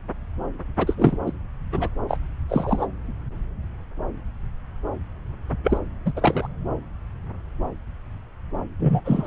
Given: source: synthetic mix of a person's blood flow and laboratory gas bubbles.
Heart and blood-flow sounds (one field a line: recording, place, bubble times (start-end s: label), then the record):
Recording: Doppler ultrasound of blood flow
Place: subclavian vein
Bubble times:
0.78-1.17 s: bubbles
1.25-1.31 s: bubbles
1.72-1.89 s: bubbles
2.08-2.17 s: bubbles
2.49-2.87 s: bubbles
5.63-5.79 s: bubbles
6.05-6.12 s: bubbles
6.16-6.47 s: bubbles
8.79-9.00 s: bubbles
9.05-9.27 s: bubbles
From the record:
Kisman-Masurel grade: 232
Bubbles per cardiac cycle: several, 3 to 8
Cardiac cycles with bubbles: 50 to 99%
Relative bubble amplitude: moderate (0.250 to 0.450)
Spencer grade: 3 (all of the cardiac periods contain showers or single bubble signals, but not dominating or overriding the cardiac motion signals)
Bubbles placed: anywhere in the cardiac cycle